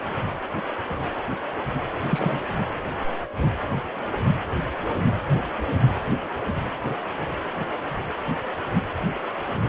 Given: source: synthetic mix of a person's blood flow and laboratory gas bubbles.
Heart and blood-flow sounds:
Doppler ultrasound of blood flow; precordium
2.09-2.42 s: bubbles
From the record:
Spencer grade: 1 (occasional bubble signal discernible with the cardiac motion signal, with majority of cardiac periods free of bubbles); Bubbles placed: anywhere in the cardiac cycle

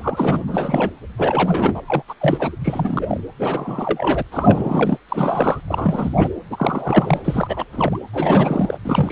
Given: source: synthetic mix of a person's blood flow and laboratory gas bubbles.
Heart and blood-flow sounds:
Doppler ultrasound of blood flow; precordium
0.00-0.43 s: bubbles
0.47-0.92 s: bubbles
1.18-1.82 s: bubbles
1.88-2.02 s: bubbles
2.08-2.14 s: bubbles
2.20-2.56 s: bubbles
2.63-3.21 s: bubbles
3.39-4.22 s: bubbles
4.31-4.97 s: bubbles
5.08-5.61 s: bubbles
5.67-6.33 s: bubbles
6.50-7.65 s: bubbles
7.72-7.99 s: bubbles
8.13-8.78 s: bubbles
8.85-9.12 s: bubbles
From the record:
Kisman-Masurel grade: 342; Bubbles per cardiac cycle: rolling drumbeat, 9 or more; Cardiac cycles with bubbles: 100%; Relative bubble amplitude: moderate (0.250 to 0.450); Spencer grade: 3 (all of the cardiac periods contain showers or single bubble signals, but not dominating or overriding the cardiac motion signals); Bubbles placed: anywhere in the cardiac cycle

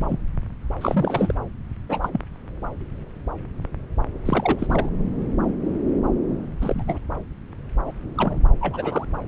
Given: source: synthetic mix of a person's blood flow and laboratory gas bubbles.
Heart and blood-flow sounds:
Doppler ultrasound of blood flow; subclavian vein
0.00-0.18 s: bubbles
0.80-1.34 s: bubbles
1.89-2.21 s: bubbles
4.25-4.89 s: bubbles
6.61-6.98 s: bubbles
7.85-7.92 s: bubbles
8.17-8.38 s: bubbles
8.61-9.05 s: bubbles
From the record:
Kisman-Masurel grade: 222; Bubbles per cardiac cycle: several, 3 to 8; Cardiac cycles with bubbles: 10 to 50%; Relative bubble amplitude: moderate (0.250 to 0.450); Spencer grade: 2 (many but less than half of the cardiac periods contain bubble signals, singularly or in groups); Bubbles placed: anywhere in the cardiac cycle

